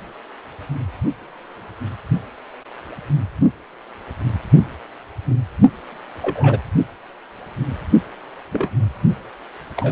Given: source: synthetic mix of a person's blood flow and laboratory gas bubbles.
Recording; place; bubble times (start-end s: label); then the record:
Doppler ultrasound of blood flow; precordium
6.21-6.59 s: bubbles
8.52-8.69 s: bubbles
9.77-9.92 s: bubbles
From the record:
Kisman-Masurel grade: 122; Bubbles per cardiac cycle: 1 to 2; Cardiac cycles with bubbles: 10 to 50%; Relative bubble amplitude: moderate (0.250 to 0.450); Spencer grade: 2 (many but less than half of the cardiac periods contain bubble signals, singularly or in groups); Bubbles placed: only in the low amplitude regions of the cardiac cycle